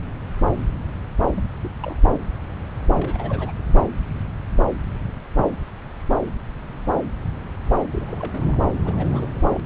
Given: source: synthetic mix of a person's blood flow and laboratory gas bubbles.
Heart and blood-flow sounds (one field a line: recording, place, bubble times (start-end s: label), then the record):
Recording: Doppler ultrasound of blood flow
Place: subclavian vein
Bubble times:
1.36-1.43 s: bubbles
1.63-1.70 s: bubbles
1.82-1.95 s: bubbles
2.93-3.53 s: bubbles
7.92-8.59 s: bubbles
8.85-9.30 s: bubbles
9.36-9.60 s: bubbles
From the record:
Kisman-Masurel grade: 221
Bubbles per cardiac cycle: several, 3 to 8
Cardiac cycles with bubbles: 10 to 50%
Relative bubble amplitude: barely perceptible (0.100 to 0.250)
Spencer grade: 2 (many but less than half of the cardiac periods contain bubble signals, singularly or in groups)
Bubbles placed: anywhere in the cardiac cycle